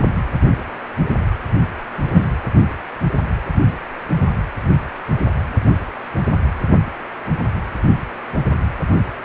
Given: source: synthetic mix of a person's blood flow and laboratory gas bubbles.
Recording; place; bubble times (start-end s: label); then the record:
Doppler ultrasound of blood flow; precordium
2.12-2.29 s: bubbles
From the record:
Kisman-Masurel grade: 112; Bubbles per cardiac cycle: 1 to 2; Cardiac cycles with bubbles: 1 to 10%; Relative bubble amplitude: moderate (0.250 to 0.450); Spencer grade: 1 (occasional bubble signal discernible with the cardiac motion signal, with majority of cardiac periods free of bubbles); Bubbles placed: anywhere in the cardiac cycle